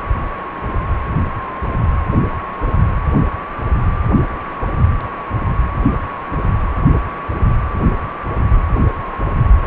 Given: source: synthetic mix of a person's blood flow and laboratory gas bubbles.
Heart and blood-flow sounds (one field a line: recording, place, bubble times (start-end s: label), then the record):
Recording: Doppler ultrasound of blood flow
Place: precordium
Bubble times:
9.62-9.67 s: bubbles
From the record:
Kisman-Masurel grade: 212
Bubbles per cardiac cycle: several, 3 to 8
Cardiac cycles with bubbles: 1 to 10%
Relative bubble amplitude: moderate (0.250 to 0.450)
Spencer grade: 1 (occasional bubble signal discernible with the cardiac motion signal, with majority of cardiac periods free of bubbles)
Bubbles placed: anywhere in the cardiac cycle